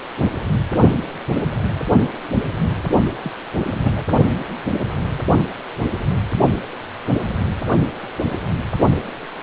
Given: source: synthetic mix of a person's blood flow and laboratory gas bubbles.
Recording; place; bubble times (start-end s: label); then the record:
Doppler ultrasound of blood flow; precordium
3.21-3.32 s: bubbles
3.63-3.93 s: bubbles
3.95-4.04 s: bubbles
From the record:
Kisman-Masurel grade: 211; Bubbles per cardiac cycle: several, 3 to 8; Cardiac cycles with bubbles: 1 to 10%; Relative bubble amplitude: barely perceptible (0.100 to 0.250); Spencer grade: 1 (occasional bubble signal discernible with the cardiac motion signal, with majority of cardiac periods free of bubbles); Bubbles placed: only in the low amplitude regions of the cardiac cycle